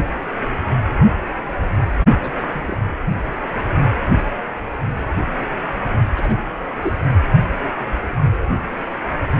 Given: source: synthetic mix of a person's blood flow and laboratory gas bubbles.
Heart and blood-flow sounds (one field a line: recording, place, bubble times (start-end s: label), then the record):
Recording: Doppler ultrasound of blood flow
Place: precordium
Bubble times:
2.20-2.42 s: bubbles
2.53-2.76 s: bubbles
6.15-6.34 s: bubbles
6.81-6.98 s: bubbles
From the record:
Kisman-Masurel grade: 122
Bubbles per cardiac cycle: 1 to 2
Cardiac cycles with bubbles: 10 to 50%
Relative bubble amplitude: moderate (0.250 to 0.450)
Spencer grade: 2 (many but less than half of the cardiac periods contain bubble signals, singularly or in groups)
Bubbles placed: anywhere in the cardiac cycle